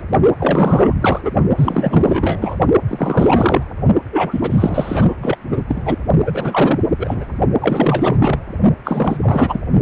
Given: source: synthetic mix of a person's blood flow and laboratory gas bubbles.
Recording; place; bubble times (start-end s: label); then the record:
Doppler ultrasound of blood flow; precordium
0.00-0.03 s: bubbles
0.40-0.95 s: bubbles
1.01-1.21 s: bubbles
1.24-1.31 s: bubbles
1.57-2.58 s: bubbles
2.88-3.63 s: bubbles
4.11-5.13 s: bubbles
5.19-5.36 s: bubbles
5.51-5.62 s: bubbles
5.67-5.98 s: bubbles
6.25-6.80 s: bubbles
6.97-7.25 s: bubbles
7.58-8.40 s: bubbles
8.84-9.60 s: bubbles
From the record:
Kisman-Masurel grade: 444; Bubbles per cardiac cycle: continuous sound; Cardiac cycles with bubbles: 100%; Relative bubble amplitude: maximal (0.775 to 0.999); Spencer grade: 4 (maximum detectable bubble signal sounding continuously throughout systole and diastole of every cardiac period, and overriding the amplitude of the normal cardiac signals); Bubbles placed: only in the low amplitude regions of the cardiac cycle